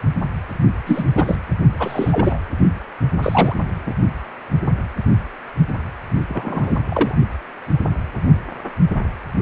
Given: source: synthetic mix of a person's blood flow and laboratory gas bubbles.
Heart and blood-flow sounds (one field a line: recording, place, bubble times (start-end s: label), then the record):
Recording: Doppler ultrasound of blood flow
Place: precordium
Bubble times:
0.86-1.05 s: bubbles
1.15-1.35 s: bubbles
1.79-2.40 s: bubbles
3.22-3.56 s: bubbles
3.86-3.92 s: bubbles
6.29-6.79 s: bubbles
6.89-7.15 s: bubbles
From the record:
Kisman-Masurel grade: 233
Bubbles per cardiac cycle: several, 3 to 8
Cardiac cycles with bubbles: 50 to 99%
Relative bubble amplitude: loud (0.450 to 0.775)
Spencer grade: 3 (all of the cardiac periods contain showers or single bubble signals, but not dominating or overriding the cardiac motion signals)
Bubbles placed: only in the low amplitude regions of the cardiac cycle